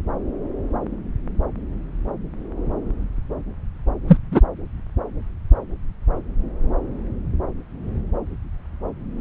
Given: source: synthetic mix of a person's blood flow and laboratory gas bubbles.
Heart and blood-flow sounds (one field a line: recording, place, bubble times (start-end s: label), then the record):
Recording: Doppler ultrasound of blood flow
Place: subclavian vein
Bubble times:
4.07-4.18 s: bubbles
4.31-4.40 s: bubbles
From the record:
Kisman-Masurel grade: 113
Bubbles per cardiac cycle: 1 to 2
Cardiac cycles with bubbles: 1 to 10%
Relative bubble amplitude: loud (0.450 to 0.775)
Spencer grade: 1 (occasional bubble signal discernible with the cardiac motion signal, with majority of cardiac periods free of bubbles)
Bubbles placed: anywhere in the cardiac cycle